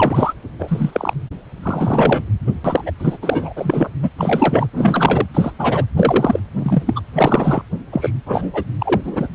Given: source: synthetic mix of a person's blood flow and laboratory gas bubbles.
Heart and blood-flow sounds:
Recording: Doppler ultrasound of blood flow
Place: precordium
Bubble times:
0.00-0.33 s: bubbles
0.59-1.14 s: bubbles
1.62-2.24 s: bubbles
2.46-2.51 s: bubbles
2.64-2.91 s: bubbles
2.99-3.17 s: bubbles
3.21-3.53 s: bubbles
3.56-3.89 s: bubbles
4.02-4.10 s: bubbles
4.18-4.67 s: bubbles
4.73-5.26 s: bubbles
5.33-5.51 s: bubbles
5.58-5.85 s: bubbles
5.96-6.39 s: bubbles
6.59-6.83 s: bubbles
6.85-7.00 s: bubbles
7.15-7.61 s: bubbles
7.92-8.11 s: bubbles
8.26-8.63 s: bubbles
8.79-9.02 s: bubbles
9.04-9.28 s: bubbles
From the record:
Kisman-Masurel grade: 243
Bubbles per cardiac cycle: several, 3 to 8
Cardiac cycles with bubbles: 100%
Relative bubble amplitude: loud (0.450 to 0.775)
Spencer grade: 3 (all of the cardiac periods contain showers or single bubble signals, but not dominating or overriding the cardiac motion signals)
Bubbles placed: anywhere in the cardiac cycle

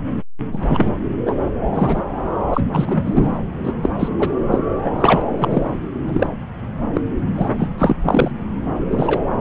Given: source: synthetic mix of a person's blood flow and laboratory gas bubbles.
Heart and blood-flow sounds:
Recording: Doppler ultrasound of blood flow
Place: subclavian vein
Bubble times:
0.52-0.89 s: bubbles
1.25-1.36 s: bubbles
1.75-2.02 s: bubbles
2.53-2.60 s: bubbles
2.71-3.41 s: bubbles
3.63-3.73 s: bubbles
3.83-3.91 s: bubbles
3.99-4.08 s: bubbles
4.18-4.30 s: bubbles
4.51-4.58 s: bubbles
4.84-4.92 s: bubbles
4.96-5.24 s: bubbles
5.37-5.71 s: bubbles
6.08-6.27 s: bubbles
6.95-7.01 s: bubbles
7.37-7.49 s: bubbles
7.58-7.70 s: bubbles
7.78-7.97 s: bubbles
8.03-8.31 s: bubbles
8.90-9.22 s: bubbles
From the record:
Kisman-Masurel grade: 243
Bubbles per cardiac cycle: several, 3 to 8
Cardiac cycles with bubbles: 100%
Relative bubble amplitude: loud (0.450 to 0.775)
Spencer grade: 3 (all of the cardiac periods contain showers or single bubble signals, but not dominating or overriding the cardiac motion signals)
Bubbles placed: anywhere in the cardiac cycle

